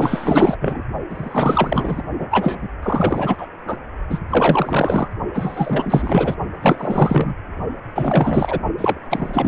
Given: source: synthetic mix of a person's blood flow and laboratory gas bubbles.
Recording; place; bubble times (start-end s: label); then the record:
Doppler ultrasound of blood flow; precordium
0.00-0.57 s: bubbles
0.61-0.82 s: bubbles
1.09-2.02 s: bubbles
2.19-2.27 s: bubbles
2.31-2.58 s: bubbles
2.61-2.69 s: bubbles
2.83-3.48 s: bubbles
3.67-3.77 s: bubbles
4.09-4.19 s: bubbles
4.29-5.08 s: bubbles
5.34-6.36 s: bubbles
6.61-7.35 s: bubbles
7.95-8.59 s: bubbles
8.78-8.99 s: bubbles
9.10-9.48 s: bubbles
From the record:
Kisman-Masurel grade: 444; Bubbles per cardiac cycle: continuous sound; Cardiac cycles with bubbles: 100%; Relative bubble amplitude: maximal (0.775 to 0.999); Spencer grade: 4 (maximum detectable bubble signal sounding continuously throughout systole and diastole of every cardiac period, and overriding the amplitude of the normal cardiac signals); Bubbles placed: only in the low amplitude regions of the cardiac cycle